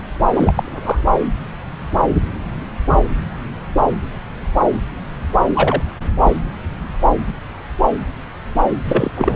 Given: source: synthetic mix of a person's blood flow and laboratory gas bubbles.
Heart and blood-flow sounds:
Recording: Doppler ultrasound of blood flow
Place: subclavian vein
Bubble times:
0.33-1.04 s: bubbles
5.54-5.83 s: bubbles
6.25-6.31 s: bubbles
8.86-9.11 s: bubbles
9.15-9.36 s: bubbles
From the record:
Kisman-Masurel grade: 223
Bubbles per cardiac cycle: several, 3 to 8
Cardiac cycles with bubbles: 10 to 50%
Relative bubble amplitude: loud (0.450 to 0.775)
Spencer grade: 2 (many but less than half of the cardiac periods contain bubble signals, singularly or in groups)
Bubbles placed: anywhere in the cardiac cycle

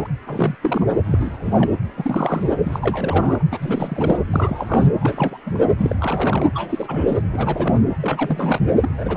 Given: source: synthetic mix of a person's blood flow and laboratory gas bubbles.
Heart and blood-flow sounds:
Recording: Doppler ultrasound of blood flow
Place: precordium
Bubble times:
0.00-0.08 s: bubbles
0.26-0.55 s: bubbles
0.61-0.85 s: bubbles
1.04-1.38 s: bubbles
1.42-1.70 s: bubbles
1.96-2.50 s: bubbles
2.63-3.44 s: bubbles
3.51-4.21 s: bubbles
4.33-4.88 s: bubbles
5.00-5.38 s: bubbles
5.46-5.51 s: bubbles
5.54-5.68 s: bubbles
5.79-5.96 s: bubbles
6.00-6.46 s: bubbles
6.54-7.22 s: bubbles
7.32-7.79 s: bubbles
8.02-8.60 s: bubbles
8.78-9.17 s: bubbles
From the record:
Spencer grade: 3 (all of the cardiac periods contain showers or single bubble signals, but not dominating or overriding the cardiac motion signals)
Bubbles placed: anywhere in the cardiac cycle

